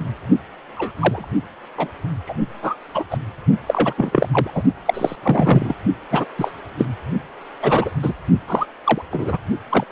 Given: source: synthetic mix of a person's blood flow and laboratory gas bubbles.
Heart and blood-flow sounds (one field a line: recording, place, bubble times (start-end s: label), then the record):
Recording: Doppler ultrasound of blood flow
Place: precordium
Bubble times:
0.00-0.03 s: bubbles
0.77-0.92 s: bubbles
0.98-1.28 s: bubbles
1.77-1.89 s: bubbles
2.27-2.34 s: bubbles
2.62-2.76 s: bubbles
2.95-3.05 s: bubbles
3.11-3.19 s: bubbles
3.66-3.94 s: bubbles
3.98-4.29 s: bubbles
4.32-4.50 s: bubbles
4.54-4.62 s: bubbles
4.85-5.16 s: bubbles
5.23-5.75 s: bubbles
6.11-6.25 s: bubbles
6.38-6.54 s: bubbles
6.78-6.88 s: bubbles
7.62-7.90 s: bubbles
8.02-8.12 s: bubbles
8.47-8.66 s: bubbles
8.84-9.02 s: bubbles
9.11-9.38 s: bubbles
9.70-9.84 s: bubbles
From the record:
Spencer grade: 3 (all of the cardiac periods contain showers or single bubble signals, but not dominating or overriding the cardiac motion signals)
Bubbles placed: only in the low amplitude regions of the cardiac cycle